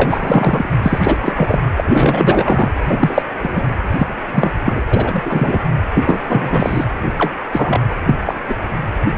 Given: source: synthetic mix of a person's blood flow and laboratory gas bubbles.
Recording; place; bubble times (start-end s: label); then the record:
Doppler ultrasound of blood flow; precordium
0.00-0.68 s: bubbles
0.82-1.17 s: bubbles
1.22-1.61 s: bubbles
1.76-2.71 s: bubbles
2.86-3.22 s: bubbles
3.42-3.63 s: bubbles
3.91-4.07 s: bubbles
4.34-4.51 s: bubbles
4.66-4.80 s: bubbles
4.90-5.59 s: bubbles
5.94-6.21 s: bubbles
6.28-6.84 s: bubbles
7.17-7.32 s: bubbles
7.52-7.80 s: bubbles
8.05-8.14 s: bubbles
8.25-8.36 s: bubbles
8.48-8.55 s: bubbles
From the record:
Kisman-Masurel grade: 233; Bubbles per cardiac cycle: several, 3 to 8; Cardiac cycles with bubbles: 50 to 99%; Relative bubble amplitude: loud (0.450 to 0.775); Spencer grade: 3 (all of the cardiac periods contain showers or single bubble signals, but not dominating or overriding the cardiac motion signals); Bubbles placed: anywhere in the cardiac cycle